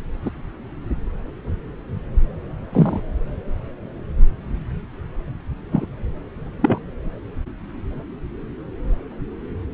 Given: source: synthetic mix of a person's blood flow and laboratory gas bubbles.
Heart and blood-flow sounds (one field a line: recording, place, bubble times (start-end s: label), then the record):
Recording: Doppler ultrasound of blood flow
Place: subclavian vein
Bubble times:
0.25-0.30 s: bubbles
2.73-3.00 s: bubbles
5.72-5.86 s: bubbles
6.61-6.79 s: bubbles
From the record:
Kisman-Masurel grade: 123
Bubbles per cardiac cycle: 1 to 2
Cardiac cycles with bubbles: 10 to 50%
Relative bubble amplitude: loud (0.450 to 0.775)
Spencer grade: 2 (many but less than half of the cardiac periods contain bubble signals, singularly or in groups)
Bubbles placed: anywhere in the cardiac cycle